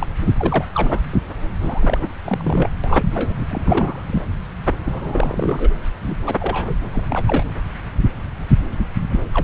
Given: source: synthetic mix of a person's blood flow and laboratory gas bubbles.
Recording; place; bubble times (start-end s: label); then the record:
Doppler ultrasound of blood flow; subclavian vein
0.00-0.07 s: bubbles
0.38-0.65 s: bubbles
0.74-1.01 s: bubbles
1.11-1.21 s: bubbles
1.60-2.08 s: bubbles
2.25-2.70 s: bubbles
2.83-3.35 s: bubbles
3.50-4.04 s: bubbles
4.07-4.22 s: bubbles
4.85-5.70 s: bubbles
6.01-6.16 s: bubbles
6.24-6.36 s: bubbles
6.39-6.77 s: bubbles
6.92-7.03 s: bubbles
7.09-7.24 s: bubbles
7.28-7.44 s: bubbles
9.11-9.20 s: bubbles
9.34-9.44 s: bubbles
From the record:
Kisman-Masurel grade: 332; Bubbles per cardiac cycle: rolling drumbeat, 9 or more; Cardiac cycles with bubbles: 50 to 99%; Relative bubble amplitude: moderate (0.250 to 0.450); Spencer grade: 3 (all of the cardiac periods contain showers or single bubble signals, but not dominating or overriding the cardiac motion signals); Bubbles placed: anywhere in the cardiac cycle